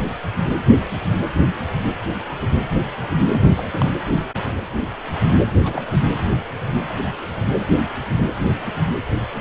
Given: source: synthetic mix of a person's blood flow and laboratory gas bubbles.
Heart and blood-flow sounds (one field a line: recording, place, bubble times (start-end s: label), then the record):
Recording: Doppler ultrasound of blood flow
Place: precordium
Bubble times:
3.32-3.41 s: bubbles
3.56-3.69 s: bubbles
3.72-3.92 s: bubbles
5.63-5.82 s: bubbles
5.92-5.97 s: bubbles
From the record:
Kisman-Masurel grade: 212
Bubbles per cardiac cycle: several, 3 to 8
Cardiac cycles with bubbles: 1 to 10%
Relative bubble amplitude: moderate (0.250 to 0.450)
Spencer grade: 1 (occasional bubble signal discernible with the cardiac motion signal, with majority of cardiac periods free of bubbles)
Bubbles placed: anywhere in the cardiac cycle